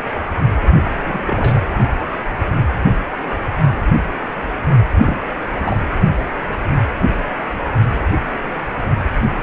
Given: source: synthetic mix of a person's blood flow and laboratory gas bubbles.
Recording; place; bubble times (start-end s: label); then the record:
Doppler ultrasound of blood flow; precordium
0.67-1.60 s: bubbles
4.89-5.17 s: bubbles
5.55-5.61 s: bubbles
5.63-5.80 s: bubbles
From the record:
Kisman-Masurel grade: 222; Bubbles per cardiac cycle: several, 3 to 8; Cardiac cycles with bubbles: 10 to 50%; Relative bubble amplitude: moderate (0.250 to 0.450); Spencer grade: 2 (many but less than half of the cardiac periods contain bubble signals, singularly or in groups); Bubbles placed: anywhere in the cardiac cycle